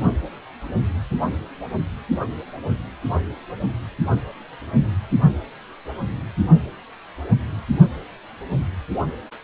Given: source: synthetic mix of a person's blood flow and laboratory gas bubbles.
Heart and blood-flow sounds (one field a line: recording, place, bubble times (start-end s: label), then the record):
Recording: Doppler ultrasound of blood flow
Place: precordium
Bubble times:
no bubbles
From the record:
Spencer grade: 0 (complete lack of bubble signals)